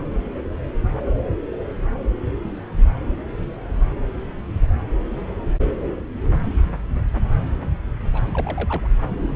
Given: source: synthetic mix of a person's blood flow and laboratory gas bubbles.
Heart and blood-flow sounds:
Doppler ultrasound of blood flow; subclavian vein
8.13-8.88 s: bubbles
From the record:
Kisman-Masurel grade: 211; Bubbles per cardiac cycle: several, 3 to 8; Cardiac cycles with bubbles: 1 to 10%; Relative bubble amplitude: barely perceptible (0.100 to 0.250); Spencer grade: 1 (occasional bubble signal discernible with the cardiac motion signal, with majority of cardiac periods free of bubbles); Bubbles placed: anywhere in the cardiac cycle

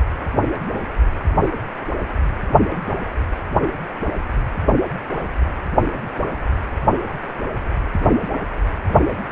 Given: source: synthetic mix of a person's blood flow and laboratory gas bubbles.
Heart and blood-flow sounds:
Doppler ultrasound of blood flow; precordium
no bubbles
From the record:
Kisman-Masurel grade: 000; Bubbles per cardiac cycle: 0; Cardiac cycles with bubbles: 0%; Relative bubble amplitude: no bubbles discernible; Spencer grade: 0 (complete lack of bubble signals)

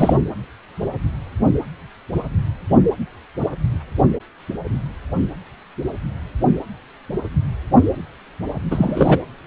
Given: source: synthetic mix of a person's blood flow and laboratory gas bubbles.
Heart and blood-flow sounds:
Doppler ultrasound of blood flow; precordium
0.00-0.17 s: bubbles
8.71-9.19 s: bubbles
From the record:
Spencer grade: 2 (many but less than half of the cardiac periods contain bubble signals, singularly or in groups); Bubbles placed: anywhere in the cardiac cycle

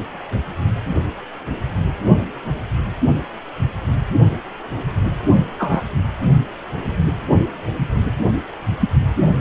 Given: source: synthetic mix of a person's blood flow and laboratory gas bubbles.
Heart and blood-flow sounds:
Doppler ultrasound of blood flow; precordium
5.58-5.82 s: bubbles
From the record:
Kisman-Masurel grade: 113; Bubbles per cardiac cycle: 1 to 2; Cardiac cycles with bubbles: 1 to 10%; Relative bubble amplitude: loud (0.450 to 0.775); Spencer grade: 1 (occasional bubble signal discernible with the cardiac motion signal, with majority of cardiac periods free of bubbles); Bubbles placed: only in the low amplitude regions of the cardiac cycle

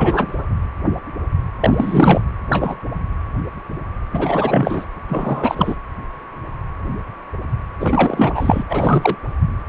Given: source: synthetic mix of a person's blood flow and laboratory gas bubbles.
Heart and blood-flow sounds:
Doppler ultrasound of blood flow; precordium
0.00-0.45 s: bubbles
1.60-2.21 s: bubbles
2.50-2.75 s: bubbles
4.12-4.86 s: bubbles
5.08-5.75 s: bubbles
7.80-8.63 s: bubbles
8.68-9.16 s: bubbles
From the record:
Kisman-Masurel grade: 233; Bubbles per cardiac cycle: several, 3 to 8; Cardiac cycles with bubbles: 50 to 99%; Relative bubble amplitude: loud (0.450 to 0.775); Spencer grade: 3 (all of the cardiac periods contain showers or single bubble signals, but not dominating or overriding the cardiac motion signals); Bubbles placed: anywhere in the cardiac cycle

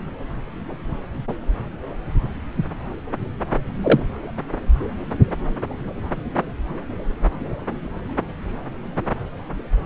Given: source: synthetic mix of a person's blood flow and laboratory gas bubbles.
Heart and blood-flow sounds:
Doppler ultrasound of blood flow; subclavian vein
3.83-4.00 s: bubbles
From the record:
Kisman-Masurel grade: 123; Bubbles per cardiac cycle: 1 to 2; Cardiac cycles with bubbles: 10 to 50%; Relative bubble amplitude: loud (0.450 to 0.775); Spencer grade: 2 (many but less than half of the cardiac periods contain bubble signals, singularly or in groups); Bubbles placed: anywhere in the cardiac cycle

